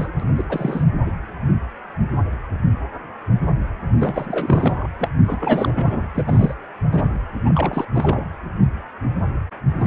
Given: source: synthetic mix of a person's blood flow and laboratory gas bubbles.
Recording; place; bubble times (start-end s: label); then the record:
Doppler ultrasound of blood flow; precordium
0.00-0.11 s: bubbles
0.19-0.29 s: bubbles
0.37-0.44 s: bubbles
0.50-0.83 s: bubbles
1.05-1.12 s: bubbles
4.00-4.88 s: bubbles
4.99-5.08 s: bubbles
5.25-6.08 s: bubbles
6.14-6.54 s: bubbles
6.91-7.23 s: bubbles
7.45-7.85 s: bubbles
7.95-8.27 s: bubbles
9.79-9.87 s: bubbles
From the record:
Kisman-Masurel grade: 332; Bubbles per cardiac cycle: rolling drumbeat, 9 or more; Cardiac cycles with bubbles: 50 to 99%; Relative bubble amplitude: moderate (0.250 to 0.450); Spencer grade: 3 (all of the cardiac periods contain showers or single bubble signals, but not dominating or overriding the cardiac motion signals); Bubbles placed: anywhere in the cardiac cycle